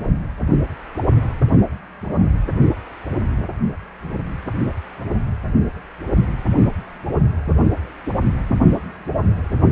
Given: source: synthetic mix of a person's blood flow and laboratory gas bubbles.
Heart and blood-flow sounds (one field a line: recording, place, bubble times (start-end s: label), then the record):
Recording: Doppler ultrasound of blood flow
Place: precordium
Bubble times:
no bubbles
From the record:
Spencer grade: 0 (complete lack of bubble signals)